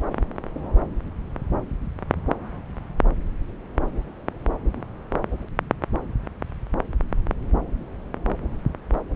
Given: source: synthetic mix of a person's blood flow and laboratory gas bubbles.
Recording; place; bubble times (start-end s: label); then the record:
Doppler ultrasound of blood flow; subclavian vein
no bubbles
From the record:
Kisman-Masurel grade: 000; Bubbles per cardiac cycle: 0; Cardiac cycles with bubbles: 0%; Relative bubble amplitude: no bubbles discernible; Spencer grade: 0 (complete lack of bubble signals)